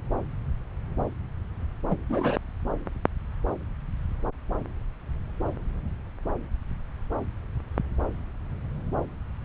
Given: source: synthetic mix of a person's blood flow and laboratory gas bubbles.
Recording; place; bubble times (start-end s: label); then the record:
Doppler ultrasound of blood flow; subclavian vein
1.90-1.95 s: bubbles
2.09-2.37 s: bubbles
From the record:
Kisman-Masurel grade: 112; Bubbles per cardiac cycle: 1 to 2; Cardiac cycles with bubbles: 1 to 10%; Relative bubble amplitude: moderate (0.250 to 0.450); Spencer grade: 1 (occasional bubble signal discernible with the cardiac motion signal, with majority of cardiac periods free of bubbles); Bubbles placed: anywhere in the cardiac cycle